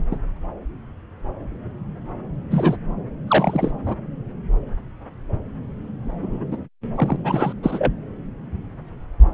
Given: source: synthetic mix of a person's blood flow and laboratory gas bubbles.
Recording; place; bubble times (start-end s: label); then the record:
Doppler ultrasound of blood flow; subclavian vein
0.11-0.18 s: bubbles
2.50-2.76 s: bubbles
3.27-3.71 s: bubbles
3.85-3.96 s: bubbles
6.22-6.46 s: bubbles
6.51-6.57 s: bubbles
6.96-7.17 s: bubbles
7.23-7.53 s: bubbles
7.62-7.93 s: bubbles
From the record:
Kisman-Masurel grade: 232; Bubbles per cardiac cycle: several, 3 to 8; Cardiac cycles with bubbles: 50 to 99%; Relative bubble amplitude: moderate (0.250 to 0.450); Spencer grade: 3 (all of the cardiac periods contain showers or single bubble signals, but not dominating or overriding the cardiac motion signals); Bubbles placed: anywhere in the cardiac cycle